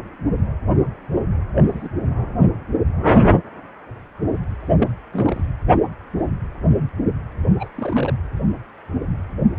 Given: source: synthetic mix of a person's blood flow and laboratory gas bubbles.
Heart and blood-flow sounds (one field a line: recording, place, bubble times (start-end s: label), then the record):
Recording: Doppler ultrasound of blood flow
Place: precordium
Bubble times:
1.56-1.62 s: bubbles
1.66-1.88 s: bubbles
4.79-4.88 s: bubbles
5.12-5.42 s: bubbles
7.59-7.68 s: bubbles
7.75-8.14 s: bubbles
From the record:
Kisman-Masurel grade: 121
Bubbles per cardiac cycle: 1 to 2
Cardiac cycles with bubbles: 10 to 50%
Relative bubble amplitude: barely perceptible (0.100 to 0.250)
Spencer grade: 2 (many but less than half of the cardiac periods contain bubble signals, singularly or in groups)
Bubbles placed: anywhere in the cardiac cycle